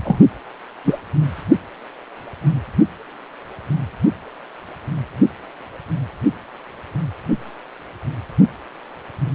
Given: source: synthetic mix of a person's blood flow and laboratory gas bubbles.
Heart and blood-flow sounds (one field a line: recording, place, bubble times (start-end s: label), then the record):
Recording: Doppler ultrasound of blood flow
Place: precordium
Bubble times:
0.04-0.22 s: bubbles
0.84-0.99 s: bubbles
From the record:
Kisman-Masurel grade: 123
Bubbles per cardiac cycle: 1 to 2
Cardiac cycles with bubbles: 10 to 50%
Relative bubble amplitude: loud (0.450 to 0.775)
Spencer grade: 2 (many but less than half of the cardiac periods contain bubble signals, singularly or in groups)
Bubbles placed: anywhere in the cardiac cycle